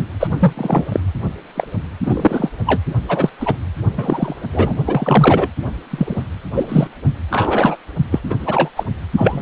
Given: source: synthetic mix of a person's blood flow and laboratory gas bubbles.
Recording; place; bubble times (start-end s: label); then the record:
Doppler ultrasound of blood flow; precordium
0.19-0.27 s: bubbles
0.31-0.53 s: bubbles
0.57-0.84 s: bubbles
0.92-1.00 s: bubbles
1.55-1.67 s: bubbles
2.03-2.51 s: bubbles
2.66-2.82 s: bubbles
3.08-3.29 s: bubbles
3.40-3.55 s: bubbles
3.97-4.35 s: bubbles
4.52-4.75 s: bubbles
4.86-5.48 s: bubbles
5.90-6.24 s: bubbles
6.54-6.88 s: bubbles
7.31-7.77 s: bubbles
8.12-8.19 s: bubbles
8.29-8.34 s: bubbles
8.46-8.69 s: bubbles
8.76-8.83 s: bubbles
9.16-9.41 s: bubbles
From the record:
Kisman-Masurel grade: 243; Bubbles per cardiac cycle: several, 3 to 8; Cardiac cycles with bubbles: 100%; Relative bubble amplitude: loud (0.450 to 0.775); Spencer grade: 3 (all of the cardiac periods contain showers or single bubble signals, but not dominating or overriding the cardiac motion signals); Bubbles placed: only in the low amplitude regions of the cardiac cycle